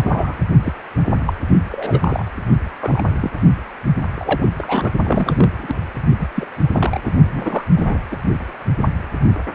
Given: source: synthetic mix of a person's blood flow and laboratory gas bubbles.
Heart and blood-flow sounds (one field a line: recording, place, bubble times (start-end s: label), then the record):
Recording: Doppler ultrasound of blood flow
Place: precordium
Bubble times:
0.00-0.39 s: bubbles
0.64-0.72 s: bubbles
1.26-1.33 s: bubbles
1.71-2.25 s: bubbles
2.82-3.01 s: bubbles
3.22-3.31 s: bubbles
4.13-4.49 s: bubbles
4.58-4.92 s: bubbles
5.03-5.50 s: bubbles
5.58-5.75 s: bubbles
6.19-6.27 s: bubbles
6.35-6.46 s: bubbles
6.72-7.00 s: bubbles
7.05-7.14 s: bubbles
7.32-7.64 s: bubbles
7.75-7.99 s: bubbles
8.12-8.17 s: bubbles
From the record:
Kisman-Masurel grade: 232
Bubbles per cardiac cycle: several, 3 to 8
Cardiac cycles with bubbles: 50 to 99%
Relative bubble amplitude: moderate (0.250 to 0.450)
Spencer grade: 3 (all of the cardiac periods contain showers or single bubble signals, but not dominating or overriding the cardiac motion signals)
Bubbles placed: only in the low amplitude regions of the cardiac cycle